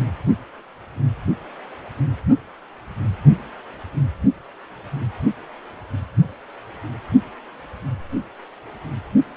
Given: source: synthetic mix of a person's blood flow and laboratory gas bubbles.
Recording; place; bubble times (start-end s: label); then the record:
Doppler ultrasound of blood flow; precordium
no bubbles
From the record:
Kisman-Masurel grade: 000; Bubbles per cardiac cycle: 0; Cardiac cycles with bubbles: 0%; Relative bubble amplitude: no bubbles discernible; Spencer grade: 0 (complete lack of bubble signals)